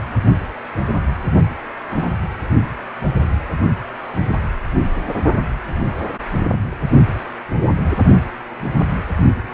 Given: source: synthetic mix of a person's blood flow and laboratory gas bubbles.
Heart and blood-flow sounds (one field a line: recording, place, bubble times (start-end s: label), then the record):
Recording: Doppler ultrasound of blood flow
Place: precordium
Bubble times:
1.87-2.10 s: bubbles
From the record:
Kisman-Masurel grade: 122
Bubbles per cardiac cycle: 1 to 2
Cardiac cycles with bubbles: 10 to 50%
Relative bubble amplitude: moderate (0.250 to 0.450)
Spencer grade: 2 (many but less than half of the cardiac periods contain bubble signals, singularly or in groups)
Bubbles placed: only in the low amplitude regions of the cardiac cycle